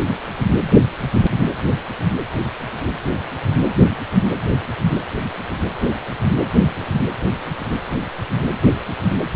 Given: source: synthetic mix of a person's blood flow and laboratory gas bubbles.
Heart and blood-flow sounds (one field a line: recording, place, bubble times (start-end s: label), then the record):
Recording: Doppler ultrasound of blood flow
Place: precordium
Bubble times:
no bubbles
From the record:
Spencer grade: 0 (complete lack of bubble signals)